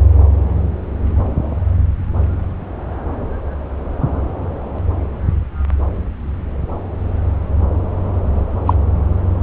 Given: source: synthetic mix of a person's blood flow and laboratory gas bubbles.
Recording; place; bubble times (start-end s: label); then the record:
Doppler ultrasound of blood flow; subclavian vein
8.66-8.74 s: bubbles
From the record:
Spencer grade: 1 (occasional bubble signal discernible with the cardiac motion signal, with majority of cardiac periods free of bubbles); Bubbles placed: anywhere in the cardiac cycle